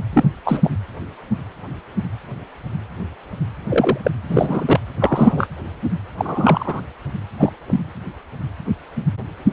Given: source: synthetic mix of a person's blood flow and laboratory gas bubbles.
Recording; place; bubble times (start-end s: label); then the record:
Doppler ultrasound of blood flow; precordium
0.13-0.31 s: bubbles
0.45-0.61 s: bubbles
0.64-0.70 s: bubbles
3.69-3.98 s: bubbles
4.04-4.11 s: bubbles
4.29-4.79 s: bubbles
4.99-5.48 s: bubbles
6.17-6.81 s: bubbles
7.39-7.53 s: bubbles
7.67-7.80 s: bubbles
From the record:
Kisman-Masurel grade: 223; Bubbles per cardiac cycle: several, 3 to 8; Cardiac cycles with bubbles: 10 to 50%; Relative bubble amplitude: loud (0.450 to 0.775); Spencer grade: 2 (many but less than half of the cardiac periods contain bubble signals, singularly or in groups); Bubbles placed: anywhere in the cardiac cycle